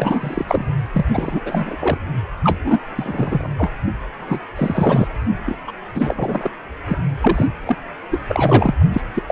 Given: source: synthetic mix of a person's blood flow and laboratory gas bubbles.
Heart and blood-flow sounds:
Doppler ultrasound of blood flow; precordium
0.00-0.67 s: bubbles
0.92-1.06 s: bubbles
1.12-1.42 s: bubbles
1.46-1.77 s: bubbles
1.79-1.98 s: bubbles
2.43-2.58 s: bubbles
2.65-2.81 s: bubbles
2.96-3.48 s: bubbles
3.58-3.72 s: bubbles
4.19-4.40 s: bubbles
4.55-5.07 s: bubbles
5.46-5.58 s: bubbles
5.67-5.71 s: bubbles
5.95-6.51 s: bubbles
6.88-6.98 s: bubbles
7.21-7.47 s: bubbles
7.66-7.77 s: bubbles
8.11-8.21 s: bubbles
8.27-8.75 s: bubbles
8.81-8.85 s: bubbles
8.93-9.01 s: bubbles
9.15-9.24 s: bubbles
9.28-9.32 s: bubbles
From the record:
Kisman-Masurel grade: 343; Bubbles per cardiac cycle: rolling drumbeat, 9 or more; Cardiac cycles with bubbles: 100%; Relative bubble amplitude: loud (0.450 to 0.775); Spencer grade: 3 (all of the cardiac periods contain showers or single bubble signals, but not dominating or overriding the cardiac motion signals); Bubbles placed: anywhere in the cardiac cycle

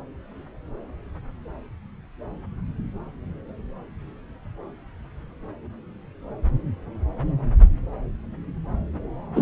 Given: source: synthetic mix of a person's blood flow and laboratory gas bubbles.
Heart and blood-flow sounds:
Doppler ultrasound of blood flow; subclavian vein
9.35-9.42 s: bubbles
From the record:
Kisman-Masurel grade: 113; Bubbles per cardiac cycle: 1 to 2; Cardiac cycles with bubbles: 1 to 10%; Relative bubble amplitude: loud (0.450 to 0.775); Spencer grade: 1 (occasional bubble signal discernible with the cardiac motion signal, with majority of cardiac periods free of bubbles); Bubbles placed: anywhere in the cardiac cycle

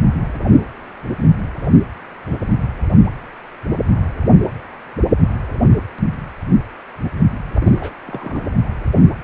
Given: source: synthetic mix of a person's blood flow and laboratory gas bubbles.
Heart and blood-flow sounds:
Doppler ultrasound of blood flow; precordium
7.59-7.95 s: bubbles
8.06-8.50 s: bubbles
From the record:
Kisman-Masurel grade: 221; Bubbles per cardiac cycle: several, 3 to 8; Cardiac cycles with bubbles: 10 to 50%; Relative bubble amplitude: barely perceptible (0.100 to 0.250); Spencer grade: 2 (many but less than half of the cardiac periods contain bubble signals, singularly or in groups); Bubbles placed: anywhere in the cardiac cycle

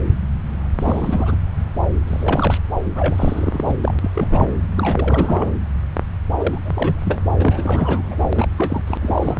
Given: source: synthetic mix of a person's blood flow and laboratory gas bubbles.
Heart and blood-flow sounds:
Doppler ultrasound of blood flow; subclavian vein
0.79-1.36 s: bubbles
2.07-2.58 s: bubbles
2.95-3.78 s: bubbles
3.83-3.94 s: bubbles
4.01-4.10 s: bubbles
4.14-4.50 s: bubbles
4.76-5.55 s: bubbles
6.38-6.59 s: bubbles
6.64-7.03 s: bubbles
7.05-7.20 s: bubbles
7.39-8.16 s: bubbles
8.19-8.29 s: bubbles
8.32-8.46 s: bubbles
8.56-8.82 s: bubbles
8.87-8.97 s: bubbles
9.02-9.40 s: bubbles
From the record:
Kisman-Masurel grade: 332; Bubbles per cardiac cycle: rolling drumbeat, 9 or more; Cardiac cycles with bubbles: 50 to 99%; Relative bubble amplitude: moderate (0.250 to 0.450); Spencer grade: 3 (all of the cardiac periods contain showers or single bubble signals, but not dominating or overriding the cardiac motion signals); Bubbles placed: anywhere in the cardiac cycle

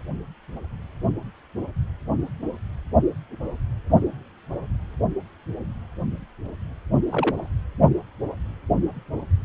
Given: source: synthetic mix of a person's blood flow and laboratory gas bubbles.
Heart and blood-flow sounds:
Doppler ultrasound of blood flow; precordium
7.10-7.50 s: bubbles
From the record:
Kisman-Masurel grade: 112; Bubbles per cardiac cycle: 1 to 2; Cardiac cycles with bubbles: 1 to 10%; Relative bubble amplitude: moderate (0.250 to 0.450); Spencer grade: 1 (occasional bubble signal discernible with the cardiac motion signal, with majority of cardiac periods free of bubbles); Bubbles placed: anywhere in the cardiac cycle

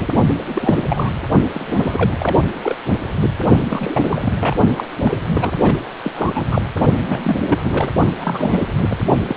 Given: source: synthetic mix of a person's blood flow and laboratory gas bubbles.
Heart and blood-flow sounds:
Doppler ultrasound of blood flow; precordium
0.00-0.07 s: bubbles
0.48-0.83 s: bubbles
0.90-1.10 s: bubbles
1.54-2.38 s: bubbles
2.52-2.77 s: bubbles
3.20-3.30 s: bubbles
3.70-4.33 s: bubbles
4.41-4.55 s: bubbles
4.76-4.86 s: bubbles
5.00-5.17 s: bubbles
5.34-5.51 s: bubbles
5.57-5.78 s: bubbles
6.04-6.13 s: bubbles
6.16-6.45 s: bubbles
6.51-6.62 s: bubbles
7.08-7.21 s: bubbles
7.24-7.37 s: bubbles
7.42-7.58 s: bubbles
7.65-7.90 s: bubbles
8.19-8.68 s: bubbles
8.77-8.97 s: bubbles
9.26-9.37 s: bubbles
From the record:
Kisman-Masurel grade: 342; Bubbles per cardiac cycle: rolling drumbeat, 9 or more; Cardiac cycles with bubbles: 100%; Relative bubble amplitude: moderate (0.250 to 0.450); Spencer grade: 3 (all of the cardiac periods contain showers or single bubble signals, but not dominating or overriding the cardiac motion signals); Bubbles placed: only in the low amplitude regions of the cardiac cycle

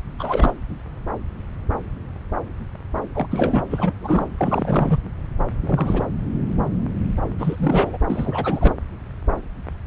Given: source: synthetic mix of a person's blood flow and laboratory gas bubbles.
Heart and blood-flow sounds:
Doppler ultrasound of blood flow; subclavian vein
0.19-0.54 s: bubbles
3.14-3.27 s: bubbles
3.31-3.64 s: bubbles
3.70-3.95 s: bubbles
4.02-4.28 s: bubbles
4.38-5.00 s: bubbles
5.62-6.06 s: bubbles
7.38-7.98 s: bubbles
8.08-8.73 s: bubbles
From the record:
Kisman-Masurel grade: 332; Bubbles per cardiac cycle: rolling drumbeat, 9 or more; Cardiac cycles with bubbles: 50 to 99%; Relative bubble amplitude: moderate (0.250 to 0.450); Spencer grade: 3 (all of the cardiac periods contain showers or single bubble signals, but not dominating or overriding the cardiac motion signals); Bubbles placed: anywhere in the cardiac cycle

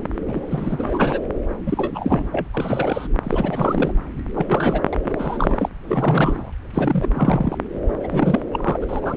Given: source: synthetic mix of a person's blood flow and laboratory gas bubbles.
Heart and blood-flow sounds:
Doppler ultrasound of blood flow; subclavian vein
0.27-1.20 s: bubbles
1.66-2.25 s: bubbles
2.31-2.48 s: bubbles
2.53-3.07 s: bubbles
3.23-3.93 s: bubbles
4.35-4.82 s: bubbles
4.92-4.96 s: bubbles
5.04-5.69 s: bubbles
5.83-6.52 s: bubbles
6.73-7.08 s: bubbles
7.13-7.57 s: bubbles
8.00-8.41 s: bubbles
8.53-8.77 s: bubbles
8.80-9.17 s: bubbles
From the record:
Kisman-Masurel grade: 342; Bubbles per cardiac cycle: rolling drumbeat, 9 or more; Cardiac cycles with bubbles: 100%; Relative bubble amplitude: moderate (0.250 to 0.450); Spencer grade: 3 (all of the cardiac periods contain showers or single bubble signals, but not dominating or overriding the cardiac motion signals); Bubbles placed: anywhere in the cardiac cycle

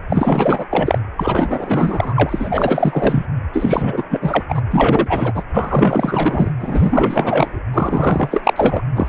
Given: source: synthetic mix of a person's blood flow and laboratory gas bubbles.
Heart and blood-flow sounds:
Doppler ultrasound of blood flow; precordium
0.09-0.65 s: bubbles
0.70-0.99 s: bubbles
1.16-3.26 s: bubbles
3.52-4.04 s: bubbles
4.09-4.43 s: bubbles
4.49-4.59 s: bubbles
4.70-5.43 s: bubbles
5.54-6.51 s: bubbles
6.59-7.60 s: bubbles
7.73-8.81 s: bubbles
8.95-9.07 s: bubbles
From the record:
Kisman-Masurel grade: 444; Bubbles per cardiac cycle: continuous sound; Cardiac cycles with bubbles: 100%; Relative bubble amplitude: maximal (0.775 to 0.999); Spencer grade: 4 (maximum detectable bubble signal sounding continuously throughout systole and diastole of every cardiac period, and overriding the amplitude of the normal cardiac signals); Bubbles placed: anywhere in the cardiac cycle

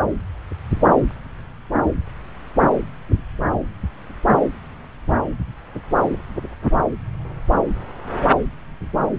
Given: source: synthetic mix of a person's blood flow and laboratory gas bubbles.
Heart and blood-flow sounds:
Doppler ultrasound of blood flow; subclavian vein
no bubbles
From the record:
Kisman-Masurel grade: 000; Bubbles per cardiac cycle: 0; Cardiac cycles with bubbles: 0%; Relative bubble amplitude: no bubbles discernible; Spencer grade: 0 (complete lack of bubble signals)

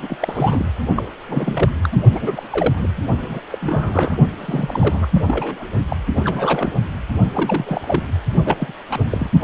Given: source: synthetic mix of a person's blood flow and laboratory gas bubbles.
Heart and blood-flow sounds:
Doppler ultrasound of blood flow; precordium
0.02-0.16 s: bubbles
0.22-0.66 s: bubbles
0.95-1.08 s: bubbles
1.29-1.89 s: bubbles
1.92-1.97 s: bubbles
2.13-2.48 s: bubbles
2.52-2.73 s: bubbles
2.77-2.90 s: bubbles
2.97-3.02 s: bubbles
3.20-3.40 s: bubbles
3.50-4.17 s: bubbles
4.38-5.06 s: bubbles
5.12-5.23 s: bubbles
5.26-5.70 s: bubbles
5.88-5.96 s: bubbles
6.11-6.72 s: bubbles
7.33-8.04 s: bubbles
8.45-8.72 s: bubbles
8.89-9.04 s: bubbles
9.08-9.30 s: bubbles
9.38-9.44 s: bubbles
From the record:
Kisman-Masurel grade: 342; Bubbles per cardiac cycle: rolling drumbeat, 9 or more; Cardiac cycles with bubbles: 100%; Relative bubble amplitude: moderate (0.250 to 0.450); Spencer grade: 3 (all of the cardiac periods contain showers or single bubble signals, but not dominating or overriding the cardiac motion signals); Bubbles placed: only in the low amplitude regions of the cardiac cycle

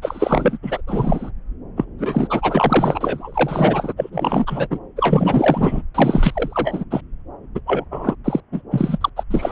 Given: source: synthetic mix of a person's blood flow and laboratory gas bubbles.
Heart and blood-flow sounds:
Doppler ultrasound of blood flow; subclavian vein
0.02-0.58 s: bubbles
0.62-0.81 s: bubbles
0.87-1.30 s: bubbles
1.76-1.85 s: bubbles
1.99-3.93 s: bubbles
3.97-4.67 s: bubbles
4.70-4.79 s: bubbles
4.96-5.82 s: bubbles
5.95-6.85 s: bubbles
6.91-7.01 s: bubbles
7.55-7.61 s: bubbles
7.66-7.85 s: bubbles
7.91-8.15 s: bubbles
8.24-8.40 s: bubbles
8.51-8.62 s: bubbles
8.71-9.09 s: bubbles
9.16-9.23 s: bubbles
9.30-9.51 s: bubbles
From the record:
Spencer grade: 4 (maximum detectable bubble signal sounding continuously throughout systole and diastole of every cardiac period, and overriding the amplitude of the normal cardiac signals); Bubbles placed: anywhere in the cardiac cycle

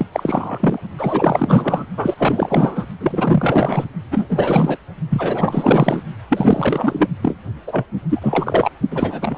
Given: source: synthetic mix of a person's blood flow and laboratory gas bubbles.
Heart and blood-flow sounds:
Doppler ultrasound of blood flow; precordium
0.00-0.06 s: bubbles
0.12-0.80 s: bubbles
0.99-1.85 s: bubbles
1.97-2.15 s: bubbles
2.17-2.86 s: bubbles
3.00-3.85 s: bubbles
4.11-4.79 s: bubbles
5.10-6.03 s: bubbles
6.29-7.08 s: bubbles
7.22-7.37 s: bubbles
7.67-7.86 s: bubbles
8.09-8.71 s: bubbles
8.91-9.38 s: bubbles
From the record:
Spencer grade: 4 (maximum detectable bubble signal sounding continuously throughout systole and diastole of every cardiac period, and overriding the amplitude of the normal cardiac signals); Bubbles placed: only in the low amplitude regions of the cardiac cycle

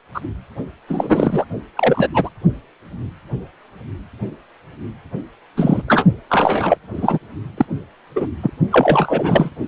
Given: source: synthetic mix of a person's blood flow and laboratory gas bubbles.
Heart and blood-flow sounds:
Doppler ultrasound of blood flow; precordium
0.14-0.21 s: bubbles
0.88-1.45 s: bubbles
1.76-2.08 s: bubbles
2.14-2.29 s: bubbles
5.56-5.82 s: bubbles
5.88-6.05 s: bubbles
6.29-6.77 s: bubbles
6.92-7.18 s: bubbles
7.57-7.65 s: bubbles
8.16-8.28 s: bubbles
8.43-8.51 s: bubbles
8.71-9.50 s: bubbles
From the record:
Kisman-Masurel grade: 233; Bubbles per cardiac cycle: several, 3 to 8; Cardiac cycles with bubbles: 50 to 99%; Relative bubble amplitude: loud (0.450 to 0.775); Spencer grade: 3 (all of the cardiac periods contain showers or single bubble signals, but not dominating or overriding the cardiac motion signals); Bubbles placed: only in the low amplitude regions of the cardiac cycle

